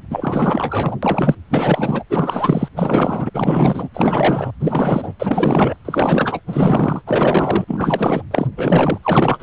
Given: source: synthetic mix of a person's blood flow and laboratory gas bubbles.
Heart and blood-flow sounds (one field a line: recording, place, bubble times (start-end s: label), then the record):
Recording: Doppler ultrasound of blood flow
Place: precordium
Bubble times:
0.10-0.97 s: bubbles
1.03-1.35 s: bubbles
1.50-2.04 s: bubbles
2.10-2.69 s: bubbles
2.75-3.30 s: bubbles
3.34-3.89 s: bubbles
3.94-4.51 s: bubbles
4.60-5.13 s: bubbles
5.19-5.76 s: bubbles
5.85-6.41 s: bubbles
6.47-7.01 s: bubbles
7.06-8.22 s: bubbles
8.31-8.47 s: bubbles
8.57-8.98 s: bubbles
9.03-9.42 s: bubbles
From the record:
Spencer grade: 4 (maximum detectable bubble signal sounding continuously throughout systole and diastole of every cardiac period, and overriding the amplitude of the normal cardiac signals)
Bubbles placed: anywhere in the cardiac cycle